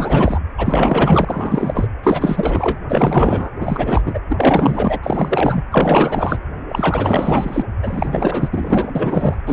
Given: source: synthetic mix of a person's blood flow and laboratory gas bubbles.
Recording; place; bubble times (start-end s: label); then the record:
Doppler ultrasound of blood flow; precordium
0.00-0.40 s: bubbles
0.57-1.88 s: bubbles
2.03-2.78 s: bubbles
2.88-3.50 s: bubbles
3.60-4.02 s: bubbles
4.05-4.20 s: bubbles
4.29-5.00 s: bubbles
5.03-5.62 s: bubbles
5.71-6.38 s: bubbles
6.69-7.66 s: bubbles
7.82-8.91 s: bubbles
8.95-9.36 s: bubbles
9.46-9.53 s: bubbles
From the record:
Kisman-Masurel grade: 444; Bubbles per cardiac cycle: continuous sound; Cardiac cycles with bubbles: 100%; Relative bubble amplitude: maximal (0.775 to 0.999); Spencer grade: 4 (maximum detectable bubble signal sounding continuously throughout systole and diastole of every cardiac period, and overriding the amplitude of the normal cardiac signals); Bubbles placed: anywhere in the cardiac cycle